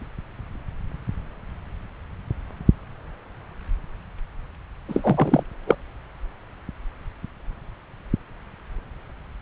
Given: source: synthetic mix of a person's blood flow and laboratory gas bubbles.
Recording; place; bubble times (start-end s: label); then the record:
Doppler ultrasound of blood flow; subclavian vein
4.88-5.43 s: bubbles
5.66-5.75 s: bubbles
From the record:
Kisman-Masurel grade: 223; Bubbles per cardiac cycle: several, 3 to 8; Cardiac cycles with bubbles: 10 to 50%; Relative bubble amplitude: loud (0.450 to 0.775); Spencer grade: 2 (many but less than half of the cardiac periods contain bubble signals, singularly or in groups); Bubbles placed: anywhere in the cardiac cycle